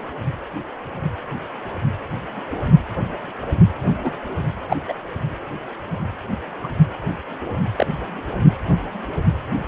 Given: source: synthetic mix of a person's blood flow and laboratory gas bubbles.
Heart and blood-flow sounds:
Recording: Doppler ultrasound of blood flow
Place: precordium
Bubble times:
3.81-3.96 s: bubbles
4.04-4.10 s: bubbles
4.69-4.76 s: bubbles
4.88-4.94 s: bubbles
6.63-6.68 s: bubbles
7.77-7.86 s: bubbles
From the record:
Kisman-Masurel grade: 122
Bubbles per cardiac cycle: 1 to 2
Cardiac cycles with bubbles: 10 to 50%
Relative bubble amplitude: moderate (0.250 to 0.450)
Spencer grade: 2 (many but less than half of the cardiac periods contain bubble signals, singularly or in groups)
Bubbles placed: anywhere in the cardiac cycle

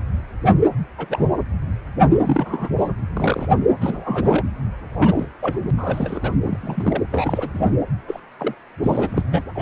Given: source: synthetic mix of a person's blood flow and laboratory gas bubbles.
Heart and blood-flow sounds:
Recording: Doppler ultrasound of blood flow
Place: precordium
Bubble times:
0.98-1.30 s: bubbles
2.24-2.69 s: bubbles
2.77-2.90 s: bubbles
3.14-3.48 s: bubbles
3.81-4.43 s: bubbles
4.97-5.28 s: bubbles
5.42-5.59 s: bubbles
5.67-5.70 s: bubbles
5.77-6.31 s: bubbles
6.43-7.06 s: bubbles
7.11-7.49 s: bubbles
7.54-7.70 s: bubbles
8.07-8.20 s: bubbles
8.38-8.54 s: bubbles
8.83-9.22 s: bubbles
9.29-9.43 s: bubbles
9.55-9.62 s: bubbles
From the record:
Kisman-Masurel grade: 232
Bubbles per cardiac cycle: several, 3 to 8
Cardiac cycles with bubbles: 50 to 99%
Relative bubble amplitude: moderate (0.250 to 0.450)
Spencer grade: 3 (all of the cardiac periods contain showers or single bubble signals, but not dominating or overriding the cardiac motion signals)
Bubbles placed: anywhere in the cardiac cycle

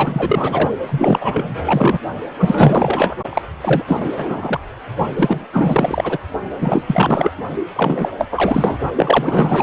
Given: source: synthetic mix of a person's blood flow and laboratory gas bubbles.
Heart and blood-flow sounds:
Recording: Doppler ultrasound of blood flow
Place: precordium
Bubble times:
0.00-0.72 s: bubbles
0.89-1.99 s: bubbles
2.40-3.15 s: bubbles
3.29-3.42 s: bubbles
3.62-3.83 s: bubbles
3.87-4.13 s: bubbles
4.16-4.60 s: bubbles
5.17-5.46 s: bubbles
5.53-6.18 s: bubbles
6.61-7.32 s: bubbles
7.75-8.09 s: bubbles
8.18-8.27 s: bubbles
8.31-8.78 s: bubbles
8.96-9.63 s: bubbles
From the record:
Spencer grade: 4 (maximum detectable bubble signal sounding continuously throughout systole and diastole of every cardiac period, and overriding the amplitude of the normal cardiac signals)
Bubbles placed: only in the low amplitude regions of the cardiac cycle

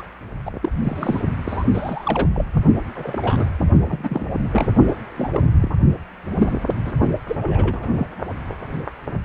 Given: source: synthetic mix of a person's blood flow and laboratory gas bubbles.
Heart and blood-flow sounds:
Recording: Doppler ultrasound of blood flow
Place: precordium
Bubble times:
0.00-0.03 s: bubbles
0.46-0.52 s: bubbles
0.62-0.69 s: bubbles
0.81-1.20 s: bubbles
1.45-1.64 s: bubbles
1.73-2.31 s: bubbles
2.34-2.44 s: bubbles
2.95-3.46 s: bubbles
3.86-4.25 s: bubbles
4.51-4.71 s: bubbles
4.87-4.94 s: bubbles
5.17-5.30 s: bubbles
5.33-5.41 s: bubbles
5.60-5.71 s: bubbles
6.38-6.53 s: bubbles
6.85-6.93 s: bubbles
7.28-7.38 s: bubbles
7.41-8.07 s: bubbles
From the record:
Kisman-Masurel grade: 232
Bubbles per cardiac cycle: several, 3 to 8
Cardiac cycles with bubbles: 50 to 99%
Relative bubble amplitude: moderate (0.250 to 0.450)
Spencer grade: 3 (all of the cardiac periods contain showers or single bubble signals, but not dominating or overriding the cardiac motion signals)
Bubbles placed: only in the low amplitude regions of the cardiac cycle

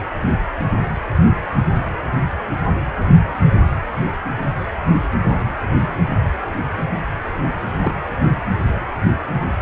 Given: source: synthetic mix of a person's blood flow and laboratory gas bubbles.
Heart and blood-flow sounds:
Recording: Doppler ultrasound of blood flow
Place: precordium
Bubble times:
7.81-7.94 s: bubbles
From the record:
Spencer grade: 1 (occasional bubble signal discernible with the cardiac motion signal, with majority of cardiac periods free of bubbles)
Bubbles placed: anywhere in the cardiac cycle

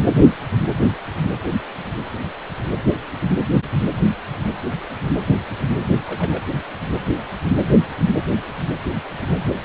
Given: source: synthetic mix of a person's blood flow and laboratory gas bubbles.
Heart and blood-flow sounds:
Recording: Doppler ultrasound of blood flow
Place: precordium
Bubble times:
6.07-6.42 s: bubbles
From the record:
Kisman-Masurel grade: 111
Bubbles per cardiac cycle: 1 to 2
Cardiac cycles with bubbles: 1 to 10%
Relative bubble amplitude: barely perceptible (0.100 to 0.250)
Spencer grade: 1 (occasional bubble signal discernible with the cardiac motion signal, with majority of cardiac periods free of bubbles)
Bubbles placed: only in the low amplitude regions of the cardiac cycle

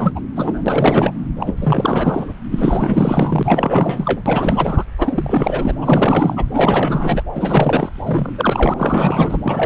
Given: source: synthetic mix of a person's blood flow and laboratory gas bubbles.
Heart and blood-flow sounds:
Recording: Doppler ultrasound of blood flow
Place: subclavian vein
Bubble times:
0.00-0.20 s: bubbles
0.36-0.63 s: bubbles
0.66-1.12 s: bubbles
1.39-2.34 s: bubbles
2.50-4.21 s: bubbles
4.26-4.84 s: bubbles
4.98-5.75 s: bubbles
5.81-6.45 s: bubbles
6.51-7.23 s: bubbles
7.35-7.89 s: bubbles
8.05-8.33 s: bubbles
8.37-8.74 s: bubbles
8.76-9.38 s: bubbles
9.43-9.66 s: bubbles
From the record:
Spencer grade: 4 (maximum detectable bubble signal sounding continuously throughout systole and diastole of every cardiac period, and overriding the amplitude of the normal cardiac signals)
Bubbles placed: anywhere in the cardiac cycle

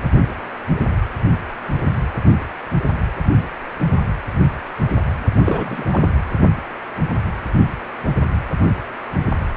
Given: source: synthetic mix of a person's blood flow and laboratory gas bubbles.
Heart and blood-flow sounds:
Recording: Doppler ultrasound of blood flow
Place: precordium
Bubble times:
5.45-5.85 s: bubbles
5.91-6.12 s: bubbles
From the record:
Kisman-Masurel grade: 212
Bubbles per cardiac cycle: several, 3 to 8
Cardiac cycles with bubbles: 1 to 10%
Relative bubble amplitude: moderate (0.250 to 0.450)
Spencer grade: 1 (occasional bubble signal discernible with the cardiac motion signal, with majority of cardiac periods free of bubbles)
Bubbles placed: anywhere in the cardiac cycle

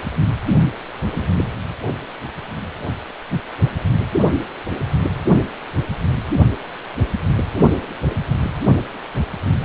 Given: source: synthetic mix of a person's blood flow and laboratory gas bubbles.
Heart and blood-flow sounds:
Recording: Doppler ultrasound of blood flow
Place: precordium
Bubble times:
no bubbles
From the record:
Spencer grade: 0 (complete lack of bubble signals)

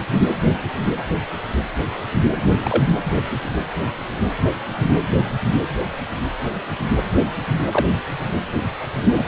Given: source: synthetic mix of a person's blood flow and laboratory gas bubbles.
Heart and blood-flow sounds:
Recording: Doppler ultrasound of blood flow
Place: precordium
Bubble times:
2.60-2.85 s: bubbles
7.71-7.87 s: bubbles
9.18-9.24 s: bubbles
From the record:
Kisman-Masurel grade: 122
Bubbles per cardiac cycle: 1 to 2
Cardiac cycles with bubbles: 10 to 50%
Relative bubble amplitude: moderate (0.250 to 0.450)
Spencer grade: 2 (many but less than half of the cardiac periods contain bubble signals, singularly or in groups)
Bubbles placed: anywhere in the cardiac cycle

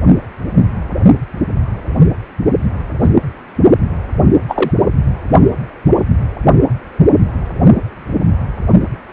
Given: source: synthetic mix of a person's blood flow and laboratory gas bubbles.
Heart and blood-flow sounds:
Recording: Doppler ultrasound of blood flow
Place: precordium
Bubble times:
3.01-3.10 s: bubbles
4.48-4.71 s: bubbles
From the record:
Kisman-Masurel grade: 123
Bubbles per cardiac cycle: 1 to 2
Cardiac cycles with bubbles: 10 to 50%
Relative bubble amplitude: loud (0.450 to 0.775)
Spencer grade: 2 (many but less than half of the cardiac periods contain bubble signals, singularly or in groups)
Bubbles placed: only in the low amplitude regions of the cardiac cycle

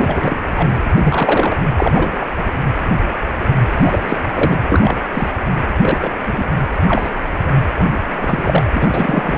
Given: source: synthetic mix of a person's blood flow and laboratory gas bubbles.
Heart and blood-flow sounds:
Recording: Doppler ultrasound of blood flow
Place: precordium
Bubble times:
0.00-0.40 s: bubbles
0.56-0.79 s: bubbles
0.96-1.56 s: bubbles
1.77-2.25 s: bubbles
3.69-4.17 s: bubbles
4.34-4.57 s: bubbles
4.69-4.95 s: bubbles
5.12-5.29 s: bubbles
5.82-6.10 s: bubbles
6.25-6.45 s: bubbles
6.75-6.79 s: bubbles
6.88-7.10 s: bubbles
7.80-8.00 s: bubbles
8.19-8.71 s: bubbles
8.73-9.38 s: bubbles
From the record:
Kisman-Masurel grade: 233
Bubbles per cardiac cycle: several, 3 to 8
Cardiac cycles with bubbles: 50 to 99%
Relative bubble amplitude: loud (0.450 to 0.775)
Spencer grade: 3 (all of the cardiac periods contain showers or single bubble signals, but not dominating or overriding the cardiac motion signals)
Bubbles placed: anywhere in the cardiac cycle

